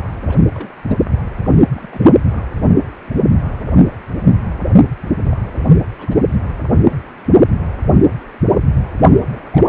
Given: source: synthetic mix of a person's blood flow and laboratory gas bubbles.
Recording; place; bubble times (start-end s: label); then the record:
Doppler ultrasound of blood flow; precordium
0.28-0.43 s: bubbles
0.52-0.73 s: bubbles
0.82-0.99 s: bubbles
1.38-1.50 s: bubbles
1.56-1.63 s: bubbles
1.75-2.12 s: bubbles
2.27-2.43 s: bubbles
5.24-5.37 s: bubbles
5.54-5.63 s: bubbles
5.79-5.83 s: bubbles
5.99-6.16 s: bubbles
6.63-6.68 s: bubbles
6.76-6.81 s: bubbles
6.89-6.95 s: bubbles
9.31-9.69 s: bubbles
From the record:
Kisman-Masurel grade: 221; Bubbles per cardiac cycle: several, 3 to 8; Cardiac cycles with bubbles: 10 to 50%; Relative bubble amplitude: barely perceptible (0.100 to 0.250); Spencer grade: 2 (many but less than half of the cardiac periods contain bubble signals, singularly or in groups); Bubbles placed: anywhere in the cardiac cycle